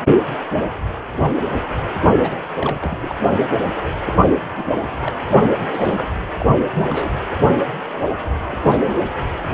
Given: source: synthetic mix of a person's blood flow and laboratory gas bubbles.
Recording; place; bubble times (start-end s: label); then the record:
Doppler ultrasound of blood flow; precordium
2.23-2.38 s: bubbles
2.57-3.15 s: bubbles
4.06-4.17 s: bubbles
4.55-4.64 s: bubbles
5.00-5.13 s: bubbles
5.29-5.46 s: bubbles
5.71-6.13 s: bubbles
6.39-6.46 s: bubbles
6.75-7.12 s: bubbles
8.48-8.98 s: bubbles
From the record:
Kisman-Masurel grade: 221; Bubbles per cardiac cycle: several, 3 to 8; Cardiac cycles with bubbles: 10 to 50%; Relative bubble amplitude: barely perceptible (0.100 to 0.250); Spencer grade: 2 (many but less than half of the cardiac periods contain bubble signals, singularly or in groups); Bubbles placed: anywhere in the cardiac cycle